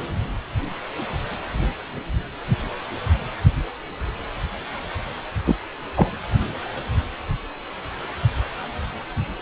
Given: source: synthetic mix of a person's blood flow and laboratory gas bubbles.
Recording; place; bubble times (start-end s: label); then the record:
Doppler ultrasound of blood flow; precordium
5.46-5.55 s: bubbles
5.96-6.07 s: bubbles
From the record:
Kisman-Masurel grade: 113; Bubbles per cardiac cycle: 1 to 2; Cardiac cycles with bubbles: 1 to 10%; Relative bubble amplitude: loud (0.450 to 0.775); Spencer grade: 1 (occasional bubble signal discernible with the cardiac motion signal, with majority of cardiac periods free of bubbles); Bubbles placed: only in the low amplitude regions of the cardiac cycle